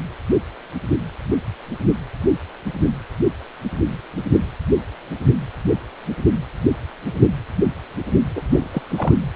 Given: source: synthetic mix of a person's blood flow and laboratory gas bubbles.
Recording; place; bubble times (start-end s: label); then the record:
Doppler ultrasound of blood flow; precordium
8.36-8.43 s: bubbles
8.50-8.68 s: bubbles
8.73-8.82 s: bubbles
8.90-9.14 s: bubbles
From the record:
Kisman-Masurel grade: 212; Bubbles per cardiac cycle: several, 3 to 8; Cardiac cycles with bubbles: 1 to 10%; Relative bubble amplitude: moderate (0.250 to 0.450); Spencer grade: 1 (occasional bubble signal discernible with the cardiac motion signal, with majority of cardiac periods free of bubbles); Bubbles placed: anywhere in the cardiac cycle